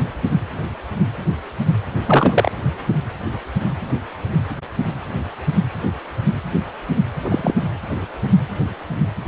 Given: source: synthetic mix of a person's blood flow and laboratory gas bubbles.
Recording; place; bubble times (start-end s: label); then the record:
Doppler ultrasound of blood flow; precordium
2.06-2.51 s: bubbles
7.24-7.54 s: bubbles
From the record:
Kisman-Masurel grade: 223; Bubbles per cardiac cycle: several, 3 to 8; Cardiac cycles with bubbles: 10 to 50%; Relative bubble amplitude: loud (0.450 to 0.775); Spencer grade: 2 (many but less than half of the cardiac periods contain bubble signals, singularly or in groups); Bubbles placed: anywhere in the cardiac cycle